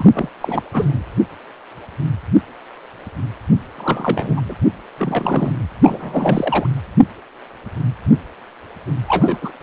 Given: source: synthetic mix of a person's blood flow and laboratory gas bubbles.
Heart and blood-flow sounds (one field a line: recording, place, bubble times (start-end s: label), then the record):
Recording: Doppler ultrasound of blood flow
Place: precordium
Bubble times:
0.00-0.10 s: bubbles
0.13-0.29 s: bubbles
0.41-0.63 s: bubbles
0.73-1.03 s: bubbles
3.77-4.41 s: bubbles
4.46-4.55 s: bubbles
4.97-5.52 s: bubbles
5.82-6.67 s: bubbles
9.07-9.38 s: bubbles
9.41-9.52 s: bubbles
9.60-9.63 s: bubbles
From the record:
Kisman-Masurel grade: 332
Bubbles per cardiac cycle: rolling drumbeat, 9 or more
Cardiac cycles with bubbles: 50 to 99%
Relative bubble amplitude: moderate (0.250 to 0.450)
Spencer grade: 3 (all of the cardiac periods contain showers or single bubble signals, but not dominating or overriding the cardiac motion signals)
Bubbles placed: anywhere in the cardiac cycle